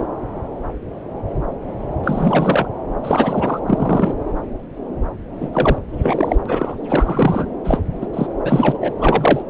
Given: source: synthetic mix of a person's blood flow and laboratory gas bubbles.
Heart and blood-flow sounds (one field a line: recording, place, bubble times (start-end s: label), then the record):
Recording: Doppler ultrasound of blood flow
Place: subclavian vein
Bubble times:
2.04-2.67 s: bubbles
3.03-3.60 s: bubbles
3.67-4.14 s: bubbles
5.41-5.79 s: bubbles
6.02-6.36 s: bubbles
6.46-6.75 s: bubbles
6.88-7.48 s: bubbles
7.64-7.79 s: bubbles
8.01-8.07 s: bubbles
8.13-8.27 s: bubbles
8.44-8.93 s: bubbles
8.99-9.43 s: bubbles
From the record:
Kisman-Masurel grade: 233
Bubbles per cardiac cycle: several, 3 to 8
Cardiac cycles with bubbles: 50 to 99%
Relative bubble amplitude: loud (0.450 to 0.775)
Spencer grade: 3 (all of the cardiac periods contain showers or single bubble signals, but not dominating or overriding the cardiac motion signals)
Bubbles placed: anywhere in the cardiac cycle